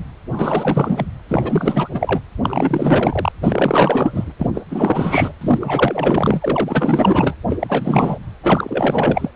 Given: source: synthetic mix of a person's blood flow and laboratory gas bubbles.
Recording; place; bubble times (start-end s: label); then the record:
Doppler ultrasound of blood flow; precordium
0.32-1.07 s: bubbles
1.29-1.89 s: bubbles
1.94-2.20 s: bubbles
2.43-3.32 s: bubbles
3.43-4.33 s: bubbles
4.38-4.51 s: bubbles
4.53-4.61 s: bubbles
4.68-5.32 s: bubbles
5.41-7.35 s: bubbles
7.49-8.18 s: bubbles
8.43-9.31 s: bubbles
From the record:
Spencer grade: 4 (maximum detectable bubble signal sounding continuously throughout systole and diastole of every cardiac period, and overriding the amplitude of the normal cardiac signals); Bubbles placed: anywhere in the cardiac cycle